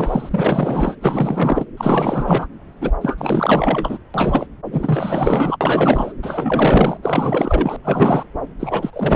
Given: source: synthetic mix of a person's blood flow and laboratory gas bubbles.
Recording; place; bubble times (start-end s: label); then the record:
Doppler ultrasound of blood flow; subclavian vein
0.00-0.96 s: bubbles
1.01-1.66 s: bubbles
1.77-2.46 s: bubbles
2.81-2.91 s: bubbles
3.01-3.99 s: bubbles
4.14-4.46 s: bubbles
4.71-5.57 s: bubbles
5.61-6.13 s: bubbles
6.23-6.97 s: bubbles
7.02-7.76 s: bubbles
7.83-8.24 s: bubbles
8.59-8.90 s: bubbles
8.93-9.16 s: bubbles
From the record:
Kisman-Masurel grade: 444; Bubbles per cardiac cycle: continuous sound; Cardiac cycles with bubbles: 100%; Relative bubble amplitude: maximal (0.775 to 0.999); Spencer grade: 4 (maximum detectable bubble signal sounding continuously throughout systole and diastole of every cardiac period, and overriding the amplitude of the normal cardiac signals); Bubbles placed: anywhere in the cardiac cycle